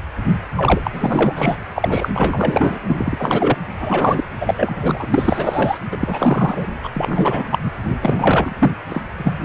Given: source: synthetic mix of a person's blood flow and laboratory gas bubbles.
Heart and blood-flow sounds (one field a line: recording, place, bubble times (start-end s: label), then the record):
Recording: Doppler ultrasound of blood flow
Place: precordium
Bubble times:
0.55-2.08 s: bubbles
2.13-2.80 s: bubbles
2.86-3.56 s: bubbles
3.79-4.24 s: bubbles
4.41-4.54 s: bubbles
4.58-5.06 s: bubbles
5.10-5.79 s: bubbles
5.92-5.97 s: bubbles
6.00-6.66 s: bubbles
6.83-6.89 s: bubbles
6.93-7.45 s: bubbles
7.51-7.58 s: bubbles
7.63-7.72 s: bubbles
8.01-8.71 s: bubbles
8.89-9.04 s: bubbles
9.18-9.45 s: bubbles
From the record:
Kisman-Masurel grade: 343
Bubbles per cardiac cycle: rolling drumbeat, 9 or more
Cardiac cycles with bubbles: 100%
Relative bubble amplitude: loud (0.450 to 0.775)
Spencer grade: 3 (all of the cardiac periods contain showers or single bubble signals, but not dominating or overriding the cardiac motion signals)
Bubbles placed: anywhere in the cardiac cycle